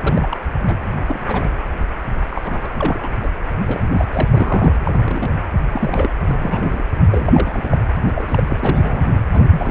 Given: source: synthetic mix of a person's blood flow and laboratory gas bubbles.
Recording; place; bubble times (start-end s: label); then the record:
Doppler ultrasound of blood flow; precordium
0.03-0.38 s: bubbles
0.66-0.76 s: bubbles
1.06-1.51 s: bubbles
2.29-2.42 s: bubbles
2.44-2.69 s: bubbles
2.79-3.11 s: bubbles
3.23-3.29 s: bubbles
3.46-3.50 s: bubbles
3.67-3.81 s: bubbles
3.93-4.05 s: bubbles
4.12-4.75 s: bubbles
4.83-5.32 s: bubbles
5.72-6.11 s: bubbles
6.25-6.84 s: bubbles
7.10-7.79 s: bubbles
8.06-8.13 s: bubbles
8.15-9.20 s: bubbles
9.26-9.46 s: bubbles
9.50-9.71 s: bubbles
From the record:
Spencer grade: 3 (all of the cardiac periods contain showers or single bubble signals, but not dominating or overriding the cardiac motion signals); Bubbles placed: anywhere in the cardiac cycle